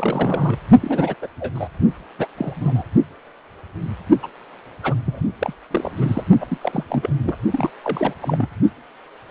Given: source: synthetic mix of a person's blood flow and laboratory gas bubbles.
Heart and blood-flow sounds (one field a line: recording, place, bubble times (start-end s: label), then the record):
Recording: Doppler ultrasound of blood flow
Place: precordium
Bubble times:
0.00-0.57 s: bubbles
0.82-1.15 s: bubbles
1.22-1.27 s: bubbles
1.40-1.52 s: bubbles
1.55-1.68 s: bubbles
2.19-2.26 s: bubbles
2.37-2.83 s: bubbles
4.22-4.27 s: bubbles
4.83-4.95 s: bubbles
5.05-5.21 s: bubbles
5.39-5.53 s: bubbles
5.71-6.24 s: bubbles
6.41-6.46 s: bubbles
6.48-6.58 s: bubbles
6.61-6.84 s: bubbles
6.89-7.12 s: bubbles
7.23-7.37 s: bubbles
7.50-7.70 s: bubbles
7.83-8.13 s: bubbles
8.22-8.48 s: bubbles
From the record:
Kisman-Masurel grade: 332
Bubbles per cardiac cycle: rolling drumbeat, 9 or more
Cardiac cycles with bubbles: 50 to 99%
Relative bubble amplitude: moderate (0.250 to 0.450)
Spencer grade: 3 (all of the cardiac periods contain showers or single bubble signals, but not dominating or overriding the cardiac motion signals)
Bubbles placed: only in the low amplitude regions of the cardiac cycle